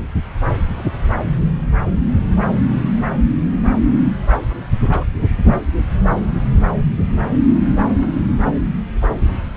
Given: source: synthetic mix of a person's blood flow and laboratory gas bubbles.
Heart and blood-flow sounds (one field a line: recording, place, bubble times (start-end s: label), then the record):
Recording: Doppler ultrasound of blood flow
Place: subclavian vein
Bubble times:
4.91-5.04 s: bubbles
From the record:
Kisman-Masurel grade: 111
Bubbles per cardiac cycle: 1 to 2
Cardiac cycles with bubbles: 1 to 10%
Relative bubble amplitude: barely perceptible (0.100 to 0.250)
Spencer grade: 1 (occasional bubble signal discernible with the cardiac motion signal, with majority of cardiac periods free of bubbles)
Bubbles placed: anywhere in the cardiac cycle